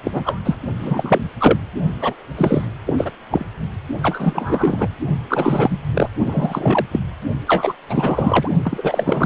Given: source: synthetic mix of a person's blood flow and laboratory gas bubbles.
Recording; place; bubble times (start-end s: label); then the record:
Doppler ultrasound of blood flow; precordium
0.04-0.60 s: bubbles
0.79-1.29 s: bubbles
1.39-1.58 s: bubbles
2.01-2.14 s: bubbles
2.37-2.66 s: bubbles
2.86-2.94 s: bubbles
2.98-3.12 s: bubbles
3.30-3.45 s: bubbles
4.01-4.88 s: bubbles
5.29-5.78 s: bubbles
5.94-6.08 s: bubbles
6.25-6.86 s: bubbles
6.91-7.00 s: bubbles
7.47-7.73 s: bubbles
7.88-8.48 s: bubbles
8.63-9.26 s: bubbles
From the record:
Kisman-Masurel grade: 333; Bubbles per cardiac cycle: rolling drumbeat, 9 or more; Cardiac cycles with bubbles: 50 to 99%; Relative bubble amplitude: loud (0.450 to 0.775); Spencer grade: 3 (all of the cardiac periods contain showers or single bubble signals, but not dominating or overriding the cardiac motion signals); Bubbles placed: only in the low amplitude regions of the cardiac cycle